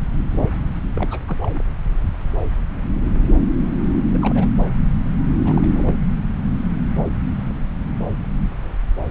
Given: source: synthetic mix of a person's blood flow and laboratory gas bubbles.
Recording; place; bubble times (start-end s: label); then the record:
Doppler ultrasound of blood flow; subclavian vein
0.95-1.19 s: bubbles
1.27-1.36 s: bubbles
1.40-1.60 s: bubbles
4.10-4.47 s: bubbles
5.44-5.66 s: bubbles
5.75-6.00 s: bubbles
From the record:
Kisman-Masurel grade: 221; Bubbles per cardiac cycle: several, 3 to 8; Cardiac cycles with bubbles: 10 to 50%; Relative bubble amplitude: barely perceptible (0.100 to 0.250); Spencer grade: 2 (many but less than half of the cardiac periods contain bubble signals, singularly or in groups); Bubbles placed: anywhere in the cardiac cycle